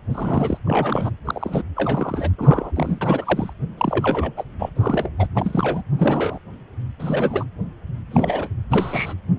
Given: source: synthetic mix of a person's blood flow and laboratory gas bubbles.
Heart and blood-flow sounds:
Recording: Doppler ultrasound of blood flow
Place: precordium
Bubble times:
0.10-0.59 s: bubbles
0.65-1.10 s: bubbles
1.25-1.63 s: bubbles
1.76-2.30 s: bubbles
2.38-2.71 s: bubbles
2.76-3.53 s: bubbles
3.77-4.31 s: bubbles
4.37-4.43 s: bubbles
4.58-4.69 s: bubbles
4.75-5.10 s: bubbles
5.18-5.27 s: bubbles
5.35-5.83 s: bubbles
5.97-6.38 s: bubbles
7.00-7.44 s: bubbles
8.11-8.49 s: bubbles
8.70-9.14 s: bubbles
From the record:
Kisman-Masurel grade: 232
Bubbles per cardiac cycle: several, 3 to 8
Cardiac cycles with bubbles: 50 to 99%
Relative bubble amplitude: moderate (0.250 to 0.450)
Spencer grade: 3 (all of the cardiac periods contain showers or single bubble signals, but not dominating or overriding the cardiac motion signals)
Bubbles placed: anywhere in the cardiac cycle

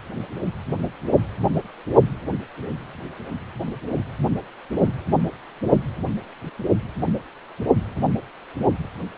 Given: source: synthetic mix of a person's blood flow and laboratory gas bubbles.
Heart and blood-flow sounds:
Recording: Doppler ultrasound of blood flow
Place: precordium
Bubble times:
no bubbles
From the record:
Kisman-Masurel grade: 000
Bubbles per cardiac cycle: 0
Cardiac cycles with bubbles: 0%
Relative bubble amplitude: no bubbles discernible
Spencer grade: 0 (complete lack of bubble signals)

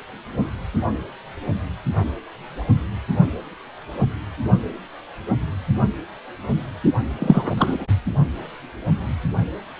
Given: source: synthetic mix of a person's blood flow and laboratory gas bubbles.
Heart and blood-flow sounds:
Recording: Doppler ultrasound of blood flow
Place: precordium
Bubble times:
7.19-7.87 s: bubbles
From the record:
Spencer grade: 1 (occasional bubble signal discernible with the cardiac motion signal, with majority of cardiac periods free of bubbles)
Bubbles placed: only in the low amplitude regions of the cardiac cycle

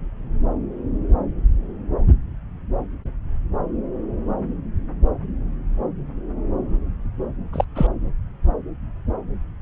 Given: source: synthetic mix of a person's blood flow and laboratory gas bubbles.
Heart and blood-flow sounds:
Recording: Doppler ultrasound of blood flow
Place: subclavian vein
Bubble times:
7.53-7.65 s: bubbles
7.75-7.87 s: bubbles
From the record:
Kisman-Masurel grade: 123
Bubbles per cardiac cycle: 1 to 2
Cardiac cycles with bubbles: 10 to 50%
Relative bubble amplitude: loud (0.450 to 0.775)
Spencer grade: 2 (many but less than half of the cardiac periods contain bubble signals, singularly or in groups)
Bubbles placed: anywhere in the cardiac cycle

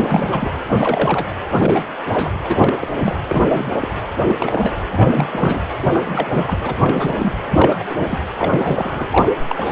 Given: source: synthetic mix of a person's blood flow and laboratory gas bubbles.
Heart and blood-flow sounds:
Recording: Doppler ultrasound of blood flow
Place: precordium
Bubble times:
0.00-0.49 s: bubbles
0.69-0.74 s: bubbles
0.78-1.30 s: bubbles
1.54-1.89 s: bubbles
2.12-2.33 s: bubbles
2.45-2.74 s: bubbles
2.81-2.88 s: bubbles
2.99-3.19 s: bubbles
3.28-3.76 s: bubbles
3.79-3.88 s: bubbles
4.26-4.35 s: bubbles
4.38-4.75 s: bubbles
4.92-5.28 s: bubbles
5.30-5.59 s: bubbles
5.81-5.89 s: bubbles
5.93-6.58 s: bubbles
6.62-6.74 s: bubbles
6.80-7.33 s: bubbles
7.50-7.83 s: bubbles
7.89-7.95 s: bubbles
8.00-8.21 s: bubbles
8.37-9.28 s: bubbles
9.48-9.71 s: bubbles
From the record:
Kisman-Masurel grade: 342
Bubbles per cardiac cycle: rolling drumbeat, 9 or more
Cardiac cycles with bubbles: 100%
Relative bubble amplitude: moderate (0.250 to 0.450)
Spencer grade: 3 (all of the cardiac periods contain showers or single bubble signals, but not dominating or overriding the cardiac motion signals)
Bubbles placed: anywhere in the cardiac cycle

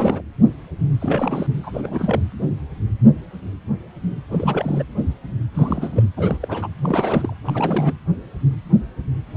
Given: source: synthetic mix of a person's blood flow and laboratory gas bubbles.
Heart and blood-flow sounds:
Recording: Doppler ultrasound of blood flow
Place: precordium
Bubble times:
0.00-0.21 s: bubbles
1.00-1.48 s: bubbles
1.63-1.71 s: bubbles
1.73-2.22 s: bubbles
4.30-4.83 s: bubbles
5.54-6.03 s: bubbles
6.17-6.38 s: bubbles
6.41-6.68 s: bubbles
6.83-7.36 s: bubbles
7.45-7.92 s: bubbles
From the record:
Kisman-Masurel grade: 332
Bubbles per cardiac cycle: rolling drumbeat, 9 or more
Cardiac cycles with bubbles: 50 to 99%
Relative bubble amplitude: moderate (0.250 to 0.450)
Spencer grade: 3 (all of the cardiac periods contain showers or single bubble signals, but not dominating or overriding the cardiac motion signals)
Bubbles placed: anywhere in the cardiac cycle

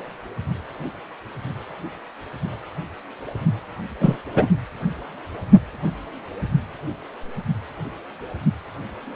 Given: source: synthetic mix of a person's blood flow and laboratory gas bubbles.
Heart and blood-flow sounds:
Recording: Doppler ultrasound of blood flow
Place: precordium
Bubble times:
3.99-4.17 s: bubbles
4.35-4.48 s: bubbles
From the record:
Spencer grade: 2 (many but less than half of the cardiac periods contain bubble signals, singularly or in groups)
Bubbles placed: only in the low amplitude regions of the cardiac cycle

